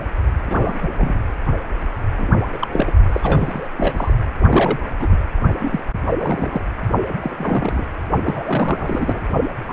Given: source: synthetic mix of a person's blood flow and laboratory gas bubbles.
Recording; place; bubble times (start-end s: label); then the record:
Doppler ultrasound of blood flow; precordium
0.46-0.88 s: bubbles
0.97-1.22 s: bubbles
2.18-2.37 s: bubbles
2.53-2.68 s: bubbles
2.72-2.92 s: bubbles
3.12-3.69 s: bubbles
3.78-4.14 s: bubbles
4.49-4.79 s: bubbles
4.99-5.17 s: bubbles
5.59-5.80 s: bubbles
6.19-6.59 s: bubbles
7.21-7.84 s: bubbles
8.25-9.20 s: bubbles
9.68-9.73 s: bubbles
From the record:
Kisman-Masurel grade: 242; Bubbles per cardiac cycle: several, 3 to 8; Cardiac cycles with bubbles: 100%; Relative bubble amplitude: moderate (0.250 to 0.450); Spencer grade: 3 (all of the cardiac periods contain showers or single bubble signals, but not dominating or overriding the cardiac motion signals); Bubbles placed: only in the low amplitude regions of the cardiac cycle